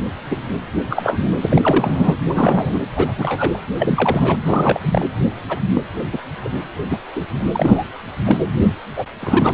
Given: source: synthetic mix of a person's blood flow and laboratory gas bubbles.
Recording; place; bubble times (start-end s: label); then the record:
Doppler ultrasound of blood flow; precordium
0.31-0.39 s: bubbles
0.89-2.15 s: bubbles
2.29-2.81 s: bubbles
2.96-3.12 s: bubbles
3.18-3.60 s: bubbles
3.79-4.37 s: bubbles
4.45-4.79 s: bubbles
4.91-5.05 s: bubbles
5.49-5.61 s: bubbles
5.73-5.82 s: bubbles
6.12-6.18 s: bubbles
6.41-6.50 s: bubbles
6.90-6.98 s: bubbles
7.16-7.27 s: bubbles
7.52-7.83 s: bubbles
8.25-8.37 s: bubbles
8.96-9.05 s: bubbles
9.21-9.53 s: bubbles
From the record:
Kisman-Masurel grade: 243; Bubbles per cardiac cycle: several, 3 to 8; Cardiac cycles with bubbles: 100%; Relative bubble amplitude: loud (0.450 to 0.775); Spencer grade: 3 (all of the cardiac periods contain showers or single bubble signals, but not dominating or overriding the cardiac motion signals); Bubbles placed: anywhere in the cardiac cycle